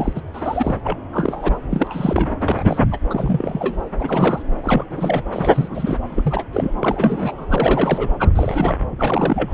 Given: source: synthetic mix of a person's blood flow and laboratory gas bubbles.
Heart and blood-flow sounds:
Doppler ultrasound of blood flow; subclavian vein
0.00-0.21 s: bubbles
0.33-0.73 s: bubbles
0.84-0.98 s: bubbles
1.12-1.52 s: bubbles
1.62-1.66 s: bubbles
1.70-2.33 s: bubbles
2.40-2.99 s: bubbles
3.09-3.75 s: bubbles
4.00-4.43 s: bubbles
4.63-4.85 s: bubbles
4.90-5.22 s: bubbles
5.33-5.97 s: bubbles
6.09-6.48 s: bubbles
6.53-6.73 s: bubbles
6.82-7.46 s: bubbles
7.50-8.10 s: bubbles
8.19-8.29 s: bubbles
8.35-8.75 s: bubbles
8.91-8.96 s: bubbles
8.98-9.53 s: bubbles
From the record:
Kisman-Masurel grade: 342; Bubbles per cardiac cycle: rolling drumbeat, 9 or more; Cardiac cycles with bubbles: 100%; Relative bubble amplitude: moderate (0.250 to 0.450); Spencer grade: 3 (all of the cardiac periods contain showers or single bubble signals, but not dominating or overriding the cardiac motion signals); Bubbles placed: anywhere in the cardiac cycle

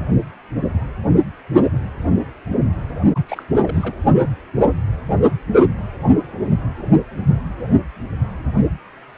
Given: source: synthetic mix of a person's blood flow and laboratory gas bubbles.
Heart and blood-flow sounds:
Doppler ultrasound of blood flow; precordium
3.15-3.19 s: bubbles
3.26-3.44 s: bubbles
3.52-3.59 s: bubbles
3.62-4.03 s: bubbles
From the record:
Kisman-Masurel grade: 211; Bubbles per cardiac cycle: several, 3 to 8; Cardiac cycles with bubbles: 1 to 10%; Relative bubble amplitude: barely perceptible (0.100 to 0.250); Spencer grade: 1 (occasional bubble signal discernible with the cardiac motion signal, with majority of cardiac periods free of bubbles); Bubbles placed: only in the low amplitude regions of the cardiac cycle

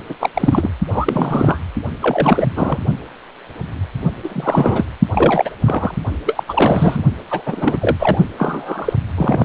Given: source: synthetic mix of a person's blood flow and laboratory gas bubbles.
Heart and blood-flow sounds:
Doppler ultrasound of blood flow; precordium
0.09-0.16 s: bubbles
0.21-0.30 s: bubbles
0.34-0.70 s: bubbles
0.93-1.58 s: bubbles
2.00-2.47 s: bubbles
2.56-2.78 s: bubbles
4.24-4.85 s: bubbles
5.12-5.50 s: bubbles
5.64-5.95 s: bubbles
6.25-6.43 s: bubbles
6.48-7.04 s: bubbles
7.31-7.42 s: bubbles
7.46-7.77 s: bubbles
7.81-7.96 s: bubbles
7.99-8.18 s: bubbles
8.38-8.93 s: bubbles
9.17-9.45 s: bubbles
From the record:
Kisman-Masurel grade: 333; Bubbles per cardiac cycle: rolling drumbeat, 9 or more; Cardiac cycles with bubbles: 50 to 99%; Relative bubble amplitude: loud (0.450 to 0.775); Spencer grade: 3 (all of the cardiac periods contain showers or single bubble signals, but not dominating or overriding the cardiac motion signals); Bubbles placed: only in the low amplitude regions of the cardiac cycle

